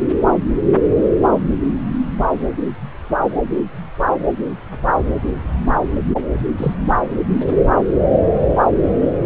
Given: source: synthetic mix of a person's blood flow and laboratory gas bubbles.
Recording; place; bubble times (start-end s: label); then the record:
Doppler ultrasound of blood flow; subclavian vein
6.58-6.75 s: bubbles
From the record:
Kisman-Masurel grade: 112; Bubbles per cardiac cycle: 1 to 2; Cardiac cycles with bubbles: 1 to 10%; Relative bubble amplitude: moderate (0.250 to 0.450); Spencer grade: 1 (occasional bubble signal discernible with the cardiac motion signal, with majority of cardiac periods free of bubbles); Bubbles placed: anywhere in the cardiac cycle